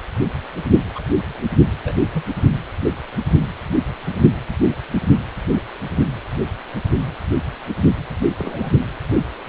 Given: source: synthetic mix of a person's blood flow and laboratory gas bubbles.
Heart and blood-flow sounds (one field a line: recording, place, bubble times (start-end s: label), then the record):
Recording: Doppler ultrasound of blood flow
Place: precordium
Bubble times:
0.95-1.03 s: bubbles
1.84-1.95 s: bubbles
2.13-2.22 s: bubbles
4.07-4.17 s: bubbles
8.38-8.71 s: bubbles
From the record:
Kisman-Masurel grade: 121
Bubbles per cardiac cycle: 1 to 2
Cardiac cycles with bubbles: 10 to 50%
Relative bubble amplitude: barely perceptible (0.100 to 0.250)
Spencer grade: 2 (many but less than half of the cardiac periods contain bubble signals, singularly or in groups)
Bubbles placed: anywhere in the cardiac cycle